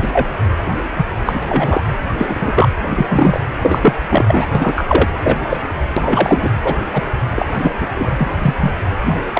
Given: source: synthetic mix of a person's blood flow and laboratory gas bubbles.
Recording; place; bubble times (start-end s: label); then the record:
Doppler ultrasound of blood flow; precordium
0.02-0.27 s: bubbles
0.97-1.06 s: bubbles
1.25-1.40 s: bubbles
1.42-1.81 s: bubbles
2.18-2.27 s: bubbles
2.29-2.69 s: bubbles
2.89-3.06 s: bubbles
3.09-3.40 s: bubbles
3.63-3.93 s: bubbles
4.08-4.48 s: bubbles
4.55-5.07 s: bubbles
5.23-5.39 s: bubbles
5.49-5.57 s: bubbles
5.96-6.49 s: bubbles
6.63-6.75 s: bubbles
6.93-7.02 s: bubbles
7.36-7.45 s: bubbles
7.59-7.70 s: bubbles
7.80-7.86 s: bubbles
7.94-8.09 s: bubbles
8.18-8.28 s: bubbles
8.42-8.54 s: bubbles
8.60-8.71 s: bubbles
9.05-9.14 s: bubbles
9.33-9.40 s: bubbles
From the record:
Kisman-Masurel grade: 243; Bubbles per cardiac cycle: several, 3 to 8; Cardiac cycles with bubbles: 100%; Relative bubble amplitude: loud (0.450 to 0.775); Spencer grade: 3 (all of the cardiac periods contain showers or single bubble signals, but not dominating or overriding the cardiac motion signals); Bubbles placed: anywhere in the cardiac cycle